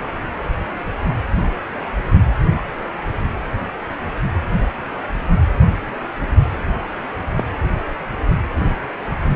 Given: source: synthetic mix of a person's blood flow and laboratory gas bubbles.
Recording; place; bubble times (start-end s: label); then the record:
Doppler ultrasound of blood flow; precordium
7.36-7.44 s: bubbles
From the record:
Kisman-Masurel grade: 112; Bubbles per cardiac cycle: 1 to 2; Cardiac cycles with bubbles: 1 to 10%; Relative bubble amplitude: moderate (0.250 to 0.450); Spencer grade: 1 (occasional bubble signal discernible with the cardiac motion signal, with majority of cardiac periods free of bubbles); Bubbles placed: anywhere in the cardiac cycle